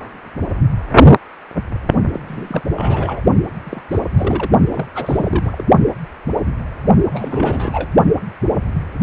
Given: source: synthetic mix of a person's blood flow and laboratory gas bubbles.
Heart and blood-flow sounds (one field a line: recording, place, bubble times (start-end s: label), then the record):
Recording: Doppler ultrasound of blood flow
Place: precordium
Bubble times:
2.13-2.20 s: bubbles
2.28-2.62 s: bubbles
2.76-3.21 s: bubbles
3.65-3.82 s: bubbles
3.91-4.00 s: bubbles
4.14-4.50 s: bubbles
4.70-4.86 s: bubbles
4.95-5.64 s: bubbles
7.13-7.89 s: bubbles
From the record:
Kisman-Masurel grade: 332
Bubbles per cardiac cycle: rolling drumbeat, 9 or more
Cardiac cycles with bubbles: 50 to 99%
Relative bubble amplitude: moderate (0.250 to 0.450)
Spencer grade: 3 (all of the cardiac periods contain showers or single bubble signals, but not dominating or overriding the cardiac motion signals)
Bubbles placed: only in the low amplitude regions of the cardiac cycle